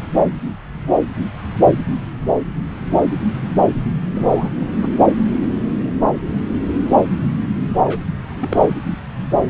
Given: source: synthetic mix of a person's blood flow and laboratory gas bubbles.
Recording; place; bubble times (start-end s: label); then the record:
Doppler ultrasound of blood flow; subclavian vein
4.14-4.50 s: bubbles
4.59-4.68 s: bubbles
4.81-4.89 s: bubbles
7.74-7.81 s: bubbles
7.84-8.03 s: bubbles
8.40-8.78 s: bubbles
From the record:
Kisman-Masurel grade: 222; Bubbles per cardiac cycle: several, 3 to 8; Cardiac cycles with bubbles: 10 to 50%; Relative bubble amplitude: moderate (0.250 to 0.450); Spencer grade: 2 (many but less than half of the cardiac periods contain bubble signals, singularly or in groups); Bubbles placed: anywhere in the cardiac cycle